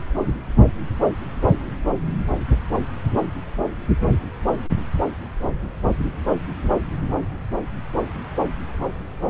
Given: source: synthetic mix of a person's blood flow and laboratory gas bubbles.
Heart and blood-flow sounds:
Doppler ultrasound of blood flow; subclavian vein
no bubbles
From the record:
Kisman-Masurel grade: 000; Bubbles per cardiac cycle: 0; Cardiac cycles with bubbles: 0%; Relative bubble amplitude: no bubbles discernible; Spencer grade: 0 (complete lack of bubble signals)

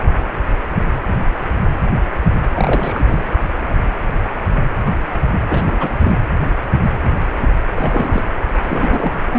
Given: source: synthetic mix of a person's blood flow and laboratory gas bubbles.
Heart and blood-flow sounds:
Doppler ultrasound of blood flow; precordium
2.54-3.02 s: bubbles
3.06-3.25 s: bubbles
5.49-6.18 s: bubbles
7.76-8.24 s: bubbles
8.64-9.13 s: bubbles
9.31-9.38 s: bubbles
From the record:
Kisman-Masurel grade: 222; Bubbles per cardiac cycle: several, 3 to 8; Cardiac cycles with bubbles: 10 to 50%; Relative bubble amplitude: moderate (0.250 to 0.450); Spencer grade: 2 (many but less than half of the cardiac periods contain bubble signals, singularly or in groups); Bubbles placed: anywhere in the cardiac cycle

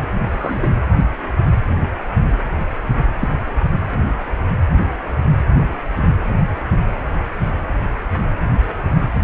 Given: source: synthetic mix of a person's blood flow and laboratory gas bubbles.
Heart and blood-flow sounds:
Doppler ultrasound of blood flow; precordium
0.32-0.69 s: bubbles
3.20-3.29 s: bubbles
From the record:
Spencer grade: 2 (many but less than half of the cardiac periods contain bubble signals, singularly or in groups); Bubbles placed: anywhere in the cardiac cycle

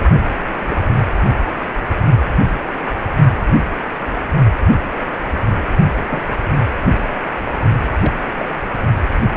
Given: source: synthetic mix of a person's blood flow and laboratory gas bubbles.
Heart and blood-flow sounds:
Doppler ultrasound of blood flow; precordium
0.68-0.77 s: bubbles
6.03-6.20 s: bubbles
8.04-8.11 s: bubbles
8.39-8.46 s: bubbles
From the record:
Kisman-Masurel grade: 121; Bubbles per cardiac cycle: 1 to 2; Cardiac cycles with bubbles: 10 to 50%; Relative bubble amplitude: barely perceptible (0.100 to 0.250); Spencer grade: 2 (many but less than half of the cardiac periods contain bubble signals, singularly or in groups); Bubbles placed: only in the low amplitude regions of the cardiac cycle

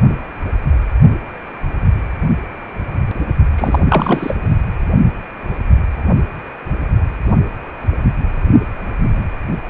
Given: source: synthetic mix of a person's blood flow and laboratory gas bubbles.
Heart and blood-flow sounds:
Doppler ultrasound of blood flow; precordium
3.56-3.79 s: bubbles
3.89-4.38 s: bubbles
From the record:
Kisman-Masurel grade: 213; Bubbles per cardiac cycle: several, 3 to 8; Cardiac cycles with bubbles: 1 to 10%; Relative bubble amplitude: loud (0.450 to 0.775); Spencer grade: 1 (occasional bubble signal discernible with the cardiac motion signal, with majority of cardiac periods free of bubbles); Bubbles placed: only in the low amplitude regions of the cardiac cycle

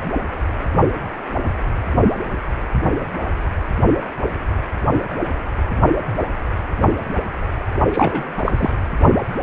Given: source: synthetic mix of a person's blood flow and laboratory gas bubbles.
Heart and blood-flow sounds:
Doppler ultrasound of blood flow; precordium
7.92-8.23 s: bubbles
8.37-8.52 s: bubbles
8.56-8.70 s: bubbles
From the record:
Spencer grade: 1 (occasional bubble signal discernible with the cardiac motion signal, with majority of cardiac periods free of bubbles); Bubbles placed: only in the low amplitude regions of the cardiac cycle

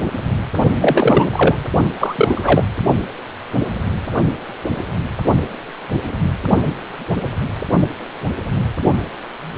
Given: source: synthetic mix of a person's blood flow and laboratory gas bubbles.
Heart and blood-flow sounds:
Doppler ultrasound of blood flow; precordium
0.80-1.29 s: bubbles
1.31-1.57 s: bubbles
2.00-2.63 s: bubbles
From the record:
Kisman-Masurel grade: 223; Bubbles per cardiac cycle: several, 3 to 8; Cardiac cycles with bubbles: 10 to 50%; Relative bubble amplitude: loud (0.450 to 0.775); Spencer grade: 2 (many but less than half of the cardiac periods contain bubble signals, singularly or in groups); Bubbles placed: only in the low amplitude regions of the cardiac cycle

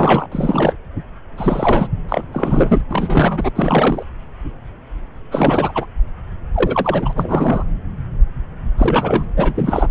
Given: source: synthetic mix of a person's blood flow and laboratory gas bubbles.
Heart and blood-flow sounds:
Doppler ultrasound of blood flow; subclavian vein
0.00-0.26 s: bubbles
0.32-0.76 s: bubbles
1.37-1.88 s: bubbles
2.09-2.24 s: bubbles
2.32-2.82 s: bubbles
2.89-3.50 s: bubbles
3.55-4.03 s: bubbles
5.31-5.72 s: bubbles
5.75-5.87 s: bubbles
6.54-7.64 s: bubbles
8.78-9.25 s: bubbles
9.36-9.88 s: bubbles
From the record:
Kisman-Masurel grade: 332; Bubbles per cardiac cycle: rolling drumbeat, 9 or more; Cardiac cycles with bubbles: 50 to 99%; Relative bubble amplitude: moderate (0.250 to 0.450); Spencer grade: 3 (all of the cardiac periods contain showers or single bubble signals, but not dominating or overriding the cardiac motion signals); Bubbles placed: anywhere in the cardiac cycle

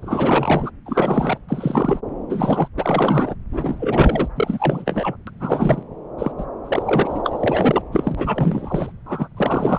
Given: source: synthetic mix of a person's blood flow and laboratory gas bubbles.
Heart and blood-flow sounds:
Doppler ultrasound of blood flow; subclavian vein
0.02-0.70 s: bubbles
0.85-1.39 s: bubbles
1.48-2.00 s: bubbles
2.29-2.68 s: bubbles
2.77-3.35 s: bubbles
3.52-4.28 s: bubbles
4.35-5.16 s: bubbles
5.27-5.30 s: bubbles
5.40-5.83 s: bubbles
6.18-6.32 s: bubbles
6.37-6.46 s: bubbles
6.64-7.82 s: bubbles
7.92-8.92 s: bubbles
9.05-9.28 s: bubbles
9.37-9.79 s: bubbles
From the record:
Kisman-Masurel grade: 343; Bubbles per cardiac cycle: rolling drumbeat, 9 or more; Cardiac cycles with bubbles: 100%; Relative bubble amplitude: loud (0.450 to 0.775); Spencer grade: 3 (all of the cardiac periods contain showers or single bubble signals, but not dominating or overriding the cardiac motion signals); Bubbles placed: anywhere in the cardiac cycle

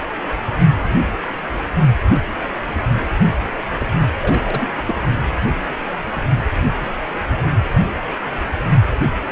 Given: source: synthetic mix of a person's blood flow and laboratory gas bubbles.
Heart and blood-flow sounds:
Doppler ultrasound of blood flow; precordium
3.77-3.86 s: bubbles
4.19-4.71 s: bubbles
4.75-4.83 s: bubbles
4.85-4.95 s: bubbles
From the record:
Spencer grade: 1 (occasional bubble signal discernible with the cardiac motion signal, with majority of cardiac periods free of bubbles); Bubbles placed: only in the low amplitude regions of the cardiac cycle

